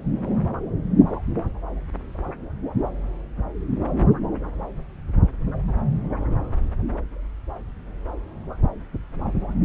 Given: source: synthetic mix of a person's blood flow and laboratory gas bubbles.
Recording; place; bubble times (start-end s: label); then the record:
Doppler ultrasound of blood flow; subclavian vein
no bubbles
From the record:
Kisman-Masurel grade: 000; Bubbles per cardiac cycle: 0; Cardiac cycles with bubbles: 0%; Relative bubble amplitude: no bubbles discernible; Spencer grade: 0 (complete lack of bubble signals)